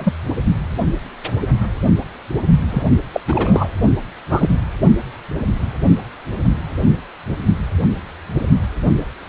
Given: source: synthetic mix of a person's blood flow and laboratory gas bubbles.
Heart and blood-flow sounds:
Doppler ultrasound of blood flow; precordium
0.00-0.12 s: bubbles
2.70-2.83 s: bubbles
3.13-3.21 s: bubbles
3.28-3.69 s: bubbles
4.30-4.57 s: bubbles
From the record:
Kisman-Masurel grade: 223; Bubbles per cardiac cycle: several, 3 to 8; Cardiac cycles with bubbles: 10 to 50%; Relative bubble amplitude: loud (0.450 to 0.775); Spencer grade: 2 (many but less than half of the cardiac periods contain bubble signals, singularly or in groups); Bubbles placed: only in the low amplitude regions of the cardiac cycle

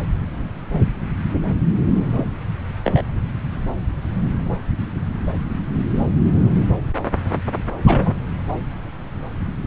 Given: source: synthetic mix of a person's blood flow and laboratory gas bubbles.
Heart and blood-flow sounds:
Doppler ultrasound of blood flow; subclavian vein
1.98-2.40 s: bubbles
2.84-3.02 s: bubbles
7.86-8.16 s: bubbles
From the record:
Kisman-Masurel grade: 122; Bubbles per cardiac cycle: 1 to 2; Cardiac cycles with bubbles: 10 to 50%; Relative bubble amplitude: moderate (0.250 to 0.450); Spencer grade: 2 (many but less than half of the cardiac periods contain bubble signals, singularly or in groups); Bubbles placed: anywhere in the cardiac cycle

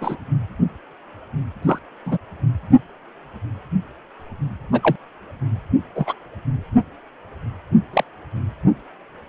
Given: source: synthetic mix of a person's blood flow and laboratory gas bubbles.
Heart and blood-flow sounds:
Doppler ultrasound of blood flow; precordium
0.01-0.17 s: bubbles
1.61-1.79 s: bubbles
2.05-2.18 s: bubbles
4.72-4.96 s: bubbles
5.95-6.14 s: bubbles
7.93-8.04 s: bubbles
From the record:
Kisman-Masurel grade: 122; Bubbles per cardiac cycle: 1 to 2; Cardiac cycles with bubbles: 10 to 50%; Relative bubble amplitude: moderate (0.250 to 0.450); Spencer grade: 2 (many but less than half of the cardiac periods contain bubble signals, singularly or in groups); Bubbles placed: anywhere in the cardiac cycle

